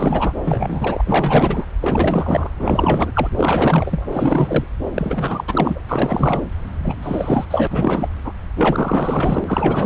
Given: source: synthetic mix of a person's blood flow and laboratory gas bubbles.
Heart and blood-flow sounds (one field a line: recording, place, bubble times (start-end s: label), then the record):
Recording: Doppler ultrasound of blood flow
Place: subclavian vein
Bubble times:
0.00-0.33 s: bubbles
0.43-1.66 s: bubbles
1.81-2.54 s: bubbles
2.59-3.30 s: bubbles
3.37-4.07 s: bubbles
4.12-4.64 s: bubbles
4.95-5.45 s: bubbles
5.47-5.81 s: bubbles
5.88-6.43 s: bubbles
6.83-6.96 s: bubbles
7.02-7.45 s: bubbles
7.50-7.67 s: bubbles
7.70-8.08 s: bubbles
8.23-8.32 s: bubbles
8.55-9.86 s: bubbles
From the record:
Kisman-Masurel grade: 444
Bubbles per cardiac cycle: continuous sound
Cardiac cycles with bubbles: 100%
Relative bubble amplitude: maximal (0.775 to 0.999)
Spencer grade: 4 (maximum detectable bubble signal sounding continuously throughout systole and diastole of every cardiac period, and overriding the amplitude of the normal cardiac signals)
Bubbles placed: anywhere in the cardiac cycle